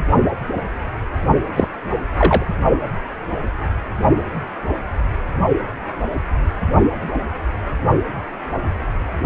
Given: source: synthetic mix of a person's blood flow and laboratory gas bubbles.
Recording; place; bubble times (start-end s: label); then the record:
Doppler ultrasound of blood flow; precordium
1.55-1.69 s: bubbles
2.18-2.46 s: bubbles
From the record:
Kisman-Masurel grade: 113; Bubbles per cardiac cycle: 1 to 2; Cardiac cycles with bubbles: 1 to 10%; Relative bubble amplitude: loud (0.450 to 0.775); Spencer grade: 1 (occasional bubble signal discernible with the cardiac motion signal, with majority of cardiac periods free of bubbles); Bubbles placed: only in the low amplitude regions of the cardiac cycle